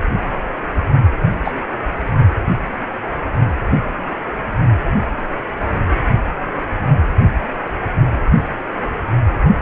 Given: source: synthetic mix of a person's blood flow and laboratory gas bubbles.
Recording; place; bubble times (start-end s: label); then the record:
Doppler ultrasound of blood flow; precordium
1.45-1.52 s: bubbles
From the record:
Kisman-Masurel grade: 113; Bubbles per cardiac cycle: 1 to 2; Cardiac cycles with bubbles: 1 to 10%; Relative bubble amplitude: loud (0.450 to 0.775); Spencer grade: 1 (occasional bubble signal discernible with the cardiac motion signal, with majority of cardiac periods free of bubbles); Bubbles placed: only in the low amplitude regions of the cardiac cycle